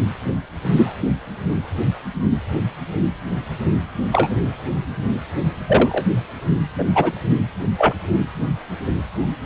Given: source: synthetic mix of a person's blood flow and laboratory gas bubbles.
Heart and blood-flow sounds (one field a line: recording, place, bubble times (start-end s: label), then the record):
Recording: Doppler ultrasound of blood flow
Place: precordium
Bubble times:
0.64-0.93 s: bubbles
4.12-4.29 s: bubbles
5.67-6.04 s: bubbles
6.78-6.84 s: bubbles
6.95-7.11 s: bubbles
7.78-7.94 s: bubbles
From the record:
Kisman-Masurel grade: 123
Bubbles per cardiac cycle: 1 to 2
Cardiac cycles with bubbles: 10 to 50%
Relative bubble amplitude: loud (0.450 to 0.775)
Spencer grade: 2 (many but less than half of the cardiac periods contain bubble signals, singularly or in groups)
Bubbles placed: only in the low amplitude regions of the cardiac cycle